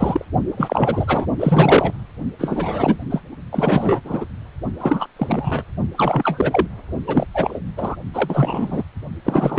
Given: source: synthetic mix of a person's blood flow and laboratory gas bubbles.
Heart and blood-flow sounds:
Doppler ultrasound of blood flow; precordium
0.00-0.25 s: bubbles
0.56-1.26 s: bubbles
1.40-1.93 s: bubbles
2.39-2.99 s: bubbles
3.09-3.21 s: bubbles
3.51-4.00 s: bubbles
4.04-4.25 s: bubbles
4.79-5.06 s: bubbles
5.16-5.63 s: bubbles
5.96-6.67 s: bubbles
7.06-7.26 s: bubbles
7.34-7.59 s: bubbles
7.77-7.96 s: bubbles
8.13-8.83 s: bubbles
9.24-9.59 s: bubbles
From the record:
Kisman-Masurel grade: 343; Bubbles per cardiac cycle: rolling drumbeat, 9 or more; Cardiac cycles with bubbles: 100%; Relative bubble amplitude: loud (0.450 to 0.775); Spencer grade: 3 (all of the cardiac periods contain showers or single bubble signals, but not dominating or overriding the cardiac motion signals); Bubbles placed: only in the low amplitude regions of the cardiac cycle

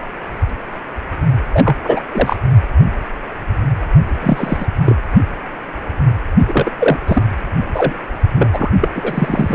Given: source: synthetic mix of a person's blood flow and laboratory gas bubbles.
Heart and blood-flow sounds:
Doppler ultrasound of blood flow; precordium
1.52-1.77 s: bubbles
1.84-2.00 s: bubbles
2.11-2.36 s: bubbles
4.20-4.67 s: bubbles
4.85-4.96 s: bubbles
6.47-6.71 s: bubbles
6.79-6.97 s: bubbles
7.06-7.23 s: bubbles
7.73-7.94 s: bubbles
8.35-8.49 s: bubbles
8.53-8.71 s: bubbles
8.80-8.89 s: bubbles
8.95-9.55 s: bubbles
From the record:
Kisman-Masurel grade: 233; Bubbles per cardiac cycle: several, 3 to 8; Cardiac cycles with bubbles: 50 to 99%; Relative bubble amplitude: loud (0.450 to 0.775); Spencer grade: 3 (all of the cardiac periods contain showers or single bubble signals, but not dominating or overriding the cardiac motion signals); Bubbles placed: only in the low amplitude regions of the cardiac cycle

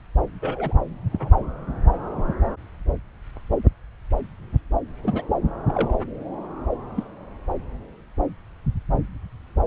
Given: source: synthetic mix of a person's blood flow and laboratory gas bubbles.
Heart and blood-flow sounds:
Doppler ultrasound of blood flow; subclavian vein
0.42-0.73 s: bubbles
1.12-1.31 s: bubbles
5.04-5.23 s: bubbles
5.69-5.92 s: bubbles
6.96-7.04 s: bubbles
From the record:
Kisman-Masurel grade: 121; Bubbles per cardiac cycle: 1 to 2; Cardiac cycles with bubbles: 10 to 50%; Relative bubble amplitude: barely perceptible (0.100 to 0.250); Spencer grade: 2 (many but less than half of the cardiac periods contain bubble signals, singularly or in groups); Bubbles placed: anywhere in the cardiac cycle

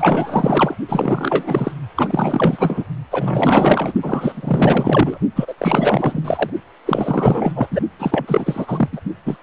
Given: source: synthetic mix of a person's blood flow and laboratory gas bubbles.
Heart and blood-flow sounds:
Doppler ultrasound of blood flow; precordium
0.00-0.76 s: bubbles
0.89-1.72 s: bubbles
1.95-2.85 s: bubbles
3.10-3.93 s: bubbles
4.02-5.18 s: bubbles
5.35-5.54 s: bubbles
5.58-6.50 s: bubbles
6.85-7.52 s: bubbles
7.55-7.67 s: bubbles
7.71-7.80 s: bubbles
7.99-8.88 s: bubbles
8.92-9.00 s: bubbles
9.25-9.37 s: bubbles
From the record:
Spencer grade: 4 (maximum detectable bubble signal sounding continuously throughout systole and diastole of every cardiac period, and overriding the amplitude of the normal cardiac signals); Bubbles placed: only in the low amplitude regions of the cardiac cycle

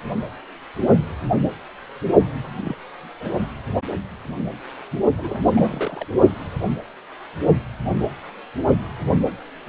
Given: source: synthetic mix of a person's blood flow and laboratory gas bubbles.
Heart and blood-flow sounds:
Doppler ultrasound of blood flow; precordium
2.58-2.75 s: bubbles
3.20-3.52 s: bubbles
5.14-6.05 s: bubbles
From the record:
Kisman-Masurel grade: 221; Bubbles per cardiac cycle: several, 3 to 8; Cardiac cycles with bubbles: 10 to 50%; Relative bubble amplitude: barely perceptible (0.100 to 0.250); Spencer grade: 2 (many but less than half of the cardiac periods contain bubble signals, singularly or in groups); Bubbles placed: only in the low amplitude regions of the cardiac cycle

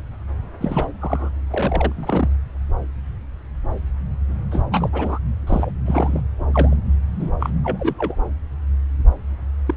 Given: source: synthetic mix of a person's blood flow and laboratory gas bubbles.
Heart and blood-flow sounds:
Doppler ultrasound of blood flow; subclavian vein
0.60-0.88 s: bubbles
1.01-1.30 s: bubbles
1.50-1.92 s: bubbles
1.95-2.28 s: bubbles
4.51-4.61 s: bubbles
4.71-4.90 s: bubbles
4.93-5.19 s: bubbles
5.47-5.73 s: bubbles
5.85-6.21 s: bubbles
6.51-6.76 s: bubbles
7.19-7.32 s: bubbles
7.40-7.50 s: bubbles
7.64-8.16 s: bubbles
9.66-9.75 s: bubbles
From the record:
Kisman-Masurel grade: 232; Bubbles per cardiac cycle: several, 3 to 8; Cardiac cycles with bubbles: 50 to 99%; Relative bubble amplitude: moderate (0.250 to 0.450); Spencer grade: 3 (all of the cardiac periods contain showers or single bubble signals, but not dominating or overriding the cardiac motion signals); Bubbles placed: anywhere in the cardiac cycle

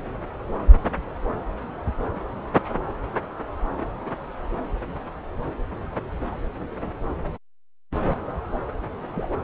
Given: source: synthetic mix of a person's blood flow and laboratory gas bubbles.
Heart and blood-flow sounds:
Doppler ultrasound of blood flow; subclavian vein
9.13-9.28 s: bubbles
From the record:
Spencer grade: 1 (occasional bubble signal discernible with the cardiac motion signal, with majority of cardiac periods free of bubbles); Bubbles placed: anywhere in the cardiac cycle

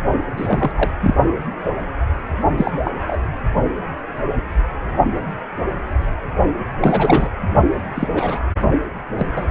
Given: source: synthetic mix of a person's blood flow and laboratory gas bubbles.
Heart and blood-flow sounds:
Doppler ultrasound of blood flow; precordium
0.36-0.71 s: bubbles
0.76-0.91 s: bubbles
1.01-1.15 s: bubbles
2.58-2.71 s: bubbles
2.84-2.94 s: bubbles
3.07-3.18 s: bubbles
6.81-7.29 s: bubbles
7.95-8.08 s: bubbles
8.14-8.40 s: bubbles
9.19-9.26 s: bubbles
9.36-9.46 s: bubbles
From the record:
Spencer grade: 3 (all of the cardiac periods contain showers or single bubble signals, but not dominating or overriding the cardiac motion signals); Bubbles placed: only in the low amplitude regions of the cardiac cycle

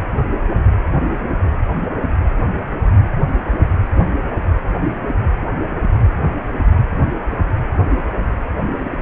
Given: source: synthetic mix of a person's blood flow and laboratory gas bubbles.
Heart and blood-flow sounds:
Doppler ultrasound of blood flow; precordium
no bubbles
From the record:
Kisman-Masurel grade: 000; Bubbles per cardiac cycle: 0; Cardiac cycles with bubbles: 0%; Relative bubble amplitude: no bubbles discernible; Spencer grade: 0 (complete lack of bubble signals)

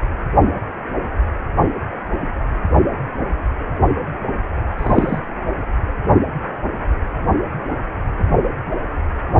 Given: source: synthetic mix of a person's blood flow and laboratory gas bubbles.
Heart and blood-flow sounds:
Doppler ultrasound of blood flow; precordium
4.78-5.20 s: bubbles
From the record:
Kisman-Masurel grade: 113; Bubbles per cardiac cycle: 1 to 2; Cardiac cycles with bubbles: 1 to 10%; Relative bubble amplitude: loud (0.450 to 0.775); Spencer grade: 1 (occasional bubble signal discernible with the cardiac motion signal, with majority of cardiac periods free of bubbles); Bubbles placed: anywhere in the cardiac cycle

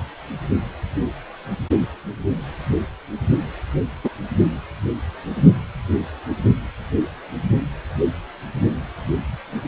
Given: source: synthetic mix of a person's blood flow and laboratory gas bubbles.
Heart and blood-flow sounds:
Doppler ultrasound of blood flow; precordium
4.04-4.10 s: bubbles
From the record:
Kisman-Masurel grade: 123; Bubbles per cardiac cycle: 1 to 2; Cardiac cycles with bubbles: 10 to 50%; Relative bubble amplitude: loud (0.450 to 0.775); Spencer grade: 2 (many but less than half of the cardiac periods contain bubble signals, singularly or in groups); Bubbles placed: anywhere in the cardiac cycle

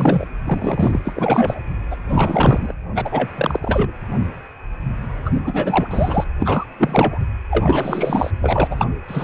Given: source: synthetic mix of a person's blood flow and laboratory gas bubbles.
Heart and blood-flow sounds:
Doppler ultrasound of blood flow; precordium
0.00-0.25 s: bubbles
0.45-0.99 s: bubbles
1.04-1.60 s: bubbles
1.90-1.96 s: bubbles
2.08-2.73 s: bubbles
2.94-3.29 s: bubbles
3.35-3.92 s: bubbles
5.25-5.30 s: bubbles
5.33-5.88 s: bubbles
5.91-6.24 s: bubbles
6.40-6.65 s: bubbles
6.79-7.19 s: bubbles
7.51-8.30 s: bubbles
8.41-8.68 s: bubbles
8.71-8.85 s: bubbles
9.07-9.24 s: bubbles
From the record:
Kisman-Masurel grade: 333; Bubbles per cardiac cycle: rolling drumbeat, 9 or more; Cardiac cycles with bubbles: 50 to 99%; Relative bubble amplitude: loud (0.450 to 0.775); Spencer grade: 3 (all of the cardiac periods contain showers or single bubble signals, but not dominating or overriding the cardiac motion signals); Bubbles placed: anywhere in the cardiac cycle

